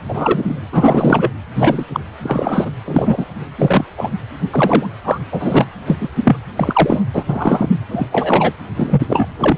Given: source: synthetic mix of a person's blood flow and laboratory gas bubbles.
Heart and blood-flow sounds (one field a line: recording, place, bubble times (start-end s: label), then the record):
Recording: Doppler ultrasound of blood flow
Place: precordium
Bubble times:
0.08-0.60 s: bubbles
0.72-1.29 s: bubbles
1.55-1.84 s: bubbles
1.93-2.00 s: bubbles
2.24-2.72 s: bubbles
2.85-3.26 s: bubbles
3.58-3.84 s: bubbles
3.97-4.09 s: bubbles
4.50-4.87 s: bubbles
5.04-5.19 s: bubbles
5.32-5.66 s: bubbles
5.86-6.09 s: bubbles
6.24-6.37 s: bubbles
6.55-7.04 s: bubbles
7.13-7.23 s: bubbles
7.28-7.68 s: bubbles
7.90-8.06 s: bubbles
8.12-8.53 s: bubbles
8.77-9.02 s: bubbles
9.08-9.31 s: bubbles
9.38-9.58 s: bubbles
From the record:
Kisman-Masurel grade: 243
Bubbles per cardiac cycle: several, 3 to 8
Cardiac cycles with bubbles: 100%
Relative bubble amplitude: loud (0.450 to 0.775)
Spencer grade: 3 (all of the cardiac periods contain showers or single bubble signals, but not dominating or overriding the cardiac motion signals)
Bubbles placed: anywhere in the cardiac cycle